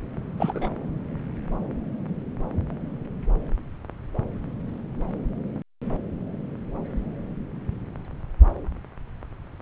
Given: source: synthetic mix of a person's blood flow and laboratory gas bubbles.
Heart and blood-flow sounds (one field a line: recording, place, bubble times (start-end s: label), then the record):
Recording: Doppler ultrasound of blood flow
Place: subclavian vein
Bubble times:
0.38-0.76 s: bubbles
From the record:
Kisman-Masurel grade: 212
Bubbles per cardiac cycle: several, 3 to 8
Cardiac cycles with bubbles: 1 to 10%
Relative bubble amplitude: moderate (0.250 to 0.450)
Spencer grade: 1 (occasional bubble signal discernible with the cardiac motion signal, with majority of cardiac periods free of bubbles)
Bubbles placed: anywhere in the cardiac cycle